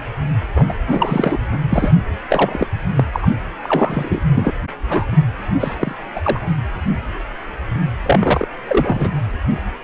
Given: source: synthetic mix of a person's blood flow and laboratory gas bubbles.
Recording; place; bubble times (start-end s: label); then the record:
Doppler ultrasound of blood flow; precordium
0.54-0.64 s: bubbles
0.68-0.73 s: bubbles
0.86-1.38 s: bubbles
1.51-1.58 s: bubbles
1.69-1.96 s: bubbles
2.29-2.66 s: bubbles
2.96-3.04 s: bubbles
3.12-3.28 s: bubbles
3.65-4.21 s: bubbles
4.35-4.52 s: bubbles
4.89-5.07 s: bubbles
5.60-5.75 s: bubbles
5.79-5.95 s: bubbles
6.14-6.40 s: bubbles
8.05-8.47 s: bubbles
8.68-9.11 s: bubbles
From the record:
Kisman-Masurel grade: 233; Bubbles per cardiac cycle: several, 3 to 8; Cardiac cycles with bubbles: 50 to 99%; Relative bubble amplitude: loud (0.450 to 0.775); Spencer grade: 3 (all of the cardiac periods contain showers or single bubble signals, but not dominating or overriding the cardiac motion signals); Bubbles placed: anywhere in the cardiac cycle